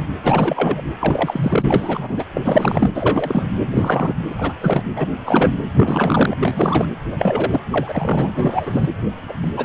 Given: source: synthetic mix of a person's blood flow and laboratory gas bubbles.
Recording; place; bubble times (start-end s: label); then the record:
Doppler ultrasound of blood flow; precordium
0.00-0.03 s: bubbles
0.23-0.81 s: bubbles
1.00-2.25 s: bubbles
2.34-2.41 s: bubbles
2.44-2.90 s: bubbles
2.94-3.42 s: bubbles
3.71-4.14 s: bubbles
4.29-4.34 s: bubbles
4.38-4.53 s: bubbles
4.61-4.83 s: bubbles
4.96-5.10 s: bubbles
5.25-5.57 s: bubbles
5.76-6.35 s: bubbles
6.41-6.86 s: bubbles
7.10-7.60 s: bubbles
7.71-8.32 s: bubbles
8.36-8.90 s: bubbles
9.29-9.33 s: bubbles
9.42-9.51 s: bubbles
9.56-9.65 s: bubbles
From the record:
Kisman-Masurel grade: 342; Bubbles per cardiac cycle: rolling drumbeat, 9 or more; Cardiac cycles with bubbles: 100%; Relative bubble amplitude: moderate (0.250 to 0.450); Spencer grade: 3 (all of the cardiac periods contain showers or single bubble signals, but not dominating or overriding the cardiac motion signals); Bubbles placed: anywhere in the cardiac cycle